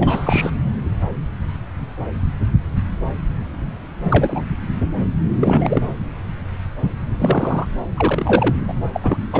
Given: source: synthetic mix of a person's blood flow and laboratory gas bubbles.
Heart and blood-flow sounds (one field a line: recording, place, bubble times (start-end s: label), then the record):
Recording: Doppler ultrasound of blood flow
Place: subclavian vein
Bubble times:
0.00-0.51 s: bubbles
4.08-4.43 s: bubbles
5.39-5.82 s: bubbles
7.18-7.66 s: bubbles
7.96-8.56 s: bubbles
8.68-8.73 s: bubbles
8.93-9.17 s: bubbles
9.32-9.40 s: bubbles
From the record:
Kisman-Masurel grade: 232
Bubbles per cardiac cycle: several, 3 to 8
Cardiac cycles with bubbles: 50 to 99%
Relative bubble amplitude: moderate (0.250 to 0.450)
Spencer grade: 3 (all of the cardiac periods contain showers or single bubble signals, but not dominating or overriding the cardiac motion signals)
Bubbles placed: anywhere in the cardiac cycle